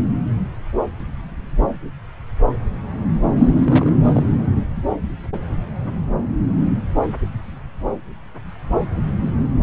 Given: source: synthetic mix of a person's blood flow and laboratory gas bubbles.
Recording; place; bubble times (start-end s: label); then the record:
Doppler ultrasound of blood flow; subclavian vein
3.38-3.92 s: bubbles
4.04-4.23 s: bubbles
From the record:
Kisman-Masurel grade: 212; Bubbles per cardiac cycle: several, 3 to 8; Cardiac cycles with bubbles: 1 to 10%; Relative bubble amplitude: moderate (0.250 to 0.450); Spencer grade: 1 (occasional bubble signal discernible with the cardiac motion signal, with majority of cardiac periods free of bubbles); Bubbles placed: anywhere in the cardiac cycle